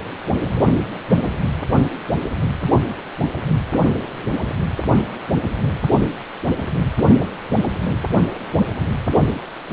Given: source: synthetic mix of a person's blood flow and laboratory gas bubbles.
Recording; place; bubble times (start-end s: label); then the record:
Doppler ultrasound of blood flow; precordium
no bubbles
From the record:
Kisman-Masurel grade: 000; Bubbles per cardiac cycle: 0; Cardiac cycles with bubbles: 0%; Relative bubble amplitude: no bubbles discernible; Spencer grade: 0 (complete lack of bubble signals)